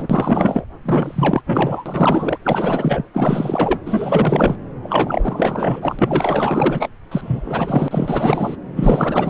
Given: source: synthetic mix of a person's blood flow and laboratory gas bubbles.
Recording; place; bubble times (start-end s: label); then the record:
Doppler ultrasound of blood flow; subclavian vein
0.00-0.64 s: bubbles
0.85-1.41 s: bubbles
1.46-2.37 s: bubbles
2.44-3.04 s: bubbles
3.14-3.79 s: bubbles
3.86-4.56 s: bubbles
4.83-5.96 s: bubbles
5.99-6.90 s: bubbles
7.11-8.56 s: bubbles
8.75-9.30 s: bubbles
From the record:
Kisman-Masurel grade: 444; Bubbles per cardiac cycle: continuous sound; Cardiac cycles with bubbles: 100%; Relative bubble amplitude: maximal (0.775 to 0.999); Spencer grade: 4 (maximum detectable bubble signal sounding continuously throughout systole and diastole of every cardiac period, and overriding the amplitude of the normal cardiac signals); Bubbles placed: anywhere in the cardiac cycle